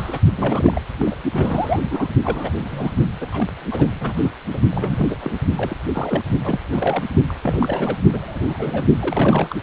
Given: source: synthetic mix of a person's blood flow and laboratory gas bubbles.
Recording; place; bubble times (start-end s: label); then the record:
Doppler ultrasound of blood flow; precordium
0.00-0.19 s: bubbles
0.35-0.81 s: bubbles
0.98-1.16 s: bubbles
1.32-2.08 s: bubbles
2.23-2.95 s: bubbles
3.20-3.48 s: bubbles
3.71-3.87 s: bubbles
4.01-4.14 s: bubbles
4.16-4.30 s: bubbles
4.53-4.61 s: bubbles
4.70-5.35 s: bubbles
5.56-5.77 s: bubbles
5.93-6.22 s: bubbles
6.44-6.60 s: bubbles
6.72-7.12 s: bubbles
7.28-7.98 s: bubbles
8.12-8.85 s: bubbles
9.01-9.59 s: bubbles
From the record:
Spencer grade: 3 (all of the cardiac periods contain showers or single bubble signals, but not dominating or overriding the cardiac motion signals); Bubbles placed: only in the low amplitude regions of the cardiac cycle